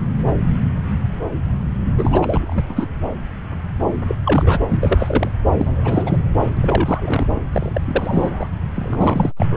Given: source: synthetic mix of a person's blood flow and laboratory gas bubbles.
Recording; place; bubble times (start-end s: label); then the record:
Doppler ultrasound of blood flow; subclavian vein
1.97-2.65 s: bubbles
2.68-2.89 s: bubbles
4.08-4.17 s: bubbles
4.25-4.60 s: bubbles
4.67-5.31 s: bubbles
5.57-6.17 s: bubbles
6.38-6.50 s: bubbles
6.57-7.41 s: bubbles
7.52-7.72 s: bubbles
7.75-7.81 s: bubbles
7.84-8.48 s: bubbles
8.74-9.32 s: bubbles
9.36-9.46 s: bubbles
9.50-9.57 s: bubbles
From the record:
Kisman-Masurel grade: 332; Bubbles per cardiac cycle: rolling drumbeat, 9 or more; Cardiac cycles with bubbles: 50 to 99%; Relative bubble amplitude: moderate (0.250 to 0.450); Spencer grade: 3 (all of the cardiac periods contain showers or single bubble signals, but not dominating or overriding the cardiac motion signals); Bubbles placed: anywhere in the cardiac cycle